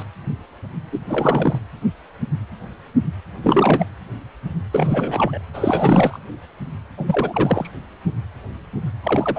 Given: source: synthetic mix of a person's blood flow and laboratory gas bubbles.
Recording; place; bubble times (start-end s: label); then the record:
Doppler ultrasound of blood flow; precordium
0.00-0.03 s: bubbles
0.92-0.99 s: bubbles
1.08-1.58 s: bubbles
3.43-3.86 s: bubbles
4.71-5.41 s: bubbles
5.54-6.19 s: bubbles
6.97-7.69 s: bubbles
9.03-9.39 s: bubbles
From the record:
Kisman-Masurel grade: 333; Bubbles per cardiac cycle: rolling drumbeat, 9 or more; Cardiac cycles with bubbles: 50 to 99%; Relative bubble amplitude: loud (0.450 to 0.775); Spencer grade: 3 (all of the cardiac periods contain showers or single bubble signals, but not dominating or overriding the cardiac motion signals); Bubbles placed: anywhere in the cardiac cycle